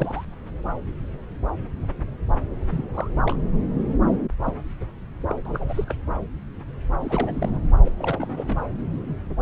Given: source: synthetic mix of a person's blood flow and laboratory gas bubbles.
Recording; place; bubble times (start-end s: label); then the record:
Doppler ultrasound of blood flow; subclavian vein
0.00-0.25 s: bubbles
2.70-2.89 s: bubbles
2.94-3.08 s: bubbles
3.25-3.35 s: bubbles
4.44-4.56 s: bubbles
4.80-4.85 s: bubbles
5.30-5.33 s: bubbles
5.45-5.84 s: bubbles
5.87-5.96 s: bubbles
7.00-7.58 s: bubbles
7.84-7.91 s: bubbles
7.97-8.61 s: bubbles
From the record:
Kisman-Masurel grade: 221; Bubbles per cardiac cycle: several, 3 to 8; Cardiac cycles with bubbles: 10 to 50%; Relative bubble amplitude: barely perceptible (0.100 to 0.250); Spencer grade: 2 (many but less than half of the cardiac periods contain bubble signals, singularly or in groups); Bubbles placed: anywhere in the cardiac cycle